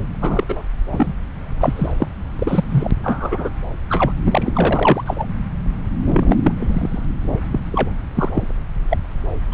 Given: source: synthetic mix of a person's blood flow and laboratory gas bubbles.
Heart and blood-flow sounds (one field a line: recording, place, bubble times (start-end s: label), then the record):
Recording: Doppler ultrasound of blood flow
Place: subclavian vein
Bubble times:
0.21-0.43 s: bubbles
0.49-0.62 s: bubbles
0.92-1.15 s: bubbles
1.60-1.92 s: bubbles
1.97-2.07 s: bubbles
2.38-2.64 s: bubbles
2.70-2.91 s: bubbles
3.03-3.49 s: bubbles
3.88-4.12 s: bubbles
4.25-5.25 s: bubbles
6.04-6.37 s: bubbles
6.43-6.51 s: bubbles
6.57-7.05 s: bubbles
7.51-7.59 s: bubbles
7.71-7.90 s: bubbles
8.14-8.59 s: bubbles
8.90-8.98 s: bubbles
9.51-9.54 s: bubbles
From the record:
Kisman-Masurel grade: 243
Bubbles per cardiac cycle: several, 3 to 8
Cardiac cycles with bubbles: 100%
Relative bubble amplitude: loud (0.450 to 0.775)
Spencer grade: 3 (all of the cardiac periods contain showers or single bubble signals, but not dominating or overriding the cardiac motion signals)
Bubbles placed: anywhere in the cardiac cycle